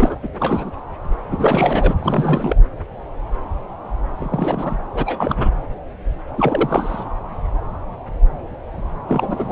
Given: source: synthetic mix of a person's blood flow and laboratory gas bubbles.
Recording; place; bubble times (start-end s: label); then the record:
Doppler ultrasound of blood flow; subclavian vein
0.00-0.15 s: bubbles
0.23-0.28 s: bubbles
0.39-0.71 s: bubbles
1.31-1.94 s: bubbles
1.99-2.60 s: bubbles
4.19-4.77 s: bubbles
4.94-5.50 s: bubbles
6.37-7.04 s: bubbles
9.09-9.52 s: bubbles
From the record:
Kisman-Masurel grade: 332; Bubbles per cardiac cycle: rolling drumbeat, 9 or more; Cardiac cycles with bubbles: 50 to 99%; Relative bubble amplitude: moderate (0.250 to 0.450); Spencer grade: 3 (all of the cardiac periods contain showers or single bubble signals, but not dominating or overriding the cardiac motion signals); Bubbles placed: anywhere in the cardiac cycle